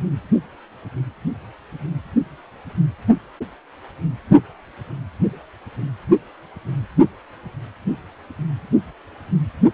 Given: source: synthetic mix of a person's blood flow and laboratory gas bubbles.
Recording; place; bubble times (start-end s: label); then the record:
Doppler ultrasound of blood flow; precordium
no bubbles
From the record:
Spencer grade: 0 (complete lack of bubble signals)